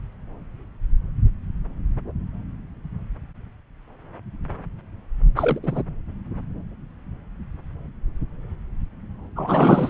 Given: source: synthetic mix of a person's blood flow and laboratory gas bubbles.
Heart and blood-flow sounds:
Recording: Doppler ultrasound of blood flow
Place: subclavian vein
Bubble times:
5.35-5.60 s: bubbles
5.62-5.83 s: bubbles
9.36-9.90 s: bubbles
From the record:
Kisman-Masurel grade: 213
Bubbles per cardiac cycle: several, 3 to 8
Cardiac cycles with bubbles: 1 to 10%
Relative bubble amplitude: loud (0.450 to 0.775)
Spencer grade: 1 (occasional bubble signal discernible with the cardiac motion signal, with majority of cardiac periods free of bubbles)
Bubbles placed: anywhere in the cardiac cycle

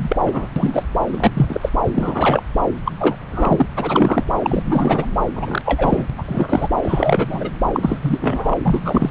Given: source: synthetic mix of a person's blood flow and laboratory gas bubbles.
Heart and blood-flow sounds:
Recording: Doppler ultrasound of blood flow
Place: subclavian vein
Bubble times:
0.00-0.48 s: bubbles
0.56-0.84 s: bubbles
1.12-1.32 s: bubbles
1.34-1.69 s: bubbles
1.86-2.42 s: bubbles
2.84-2.92 s: bubbles
3.00-3.17 s: bubbles
3.31-3.66 s: bubbles
3.75-4.24 s: bubbles
4.40-5.08 s: bubbles
5.36-5.62 s: bubbles
5.65-6.05 s: bubbles
6.10-6.15 s: bubbles
6.18-6.23 s: bubbles
6.28-6.68 s: bubbles
6.82-7.50 s: bubbles
7.73-8.58 s: bubbles
8.65-9.11 s: bubbles
From the record:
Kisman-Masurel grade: 343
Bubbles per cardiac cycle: rolling drumbeat, 9 or more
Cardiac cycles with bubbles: 100%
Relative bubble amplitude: loud (0.450 to 0.775)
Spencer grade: 3 (all of the cardiac periods contain showers or single bubble signals, but not dominating or overriding the cardiac motion signals)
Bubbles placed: anywhere in the cardiac cycle

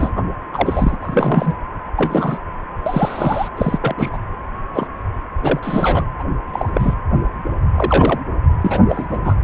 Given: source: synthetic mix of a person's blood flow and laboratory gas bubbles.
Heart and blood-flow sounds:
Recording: Doppler ultrasound of blood flow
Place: precordium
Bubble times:
0.00-0.11 s: bubbles
0.16-0.23 s: bubbles
0.53-0.98 s: bubbles
1.02-1.55 s: bubbles
1.96-2.38 s: bubbles
2.86-3.48 s: bubbles
3.56-3.78 s: bubbles
3.81-4.10 s: bubbles
4.12-4.18 s: bubbles
4.74-4.87 s: bubbles
5.43-5.60 s: bubbles
5.62-6.04 s: bubbles
6.19-6.24 s: bubbles
6.52-6.70 s: bubbles
6.74-6.94 s: bubbles
7.76-8.19 s: bubbles
8.61-8.79 s: bubbles
8.89-9.06 s: bubbles
9.10-9.18 s: bubbles
9.24-9.35 s: bubbles
From the record:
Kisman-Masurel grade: 233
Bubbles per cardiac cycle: several, 3 to 8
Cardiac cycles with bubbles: 50 to 99%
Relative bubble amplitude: loud (0.450 to 0.775)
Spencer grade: 3 (all of the cardiac periods contain showers or single bubble signals, but not dominating or overriding the cardiac motion signals)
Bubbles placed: anywhere in the cardiac cycle

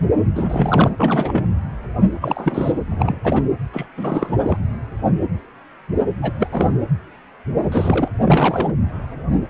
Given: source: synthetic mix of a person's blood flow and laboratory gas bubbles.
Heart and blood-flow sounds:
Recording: Doppler ultrasound of blood flow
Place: precordium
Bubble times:
0.35-0.93 s: bubbles
0.97-1.47 s: bubbles
2.21-2.79 s: bubbles
2.91-3.20 s: bubbles
3.23-3.42 s: bubbles
3.72-3.86 s: bubbles
3.96-4.58 s: bubbles
6.21-6.33 s: bubbles
6.38-6.47 s: bubbles
6.51-6.73 s: bubbles
7.58-8.09 s: bubbles
8.25-8.74 s: bubbles
From the record:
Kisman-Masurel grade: 332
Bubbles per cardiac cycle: rolling drumbeat, 9 or more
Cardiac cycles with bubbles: 50 to 99%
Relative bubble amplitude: moderate (0.250 to 0.450)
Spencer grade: 3 (all of the cardiac periods contain showers or single bubble signals, but not dominating or overriding the cardiac motion signals)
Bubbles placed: anywhere in the cardiac cycle

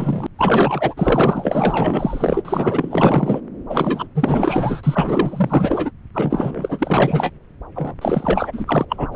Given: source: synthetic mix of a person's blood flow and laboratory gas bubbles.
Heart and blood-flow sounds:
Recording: Doppler ultrasound of blood flow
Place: subclavian vein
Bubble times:
0.00-0.27 s: bubbles
0.38-0.94 s: bubbles
0.97-2.42 s: bubbles
2.45-3.40 s: bubbles
3.69-4.07 s: bubbles
4.14-5.91 s: bubbles
6.14-7.30 s: bubbles
7.75-7.94 s: bubbles
8.01-8.85 s: bubbles
8.88-9.08 s: bubbles
9.12-9.16 s: bubbles
From the record:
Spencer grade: 4 (maximum detectable bubble signal sounding continuously throughout systole and diastole of every cardiac period, and overriding the amplitude of the normal cardiac signals)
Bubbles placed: anywhere in the cardiac cycle

